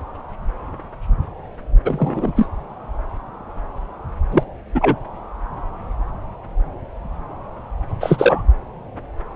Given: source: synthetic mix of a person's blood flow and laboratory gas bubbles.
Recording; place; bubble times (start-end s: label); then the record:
Doppler ultrasound of blood flow; subclavian vein
1.85-2.32 s: bubbles
2.35-2.49 s: bubbles
4.32-4.43 s: bubbles
4.75-4.96 s: bubbles
8.00-8.44 s: bubbles
From the record:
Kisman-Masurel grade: 223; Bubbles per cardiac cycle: several, 3 to 8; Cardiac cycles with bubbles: 10 to 50%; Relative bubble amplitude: loud (0.450 to 0.775); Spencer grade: 2 (many but less than half of the cardiac periods contain bubble signals, singularly or in groups); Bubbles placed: anywhere in the cardiac cycle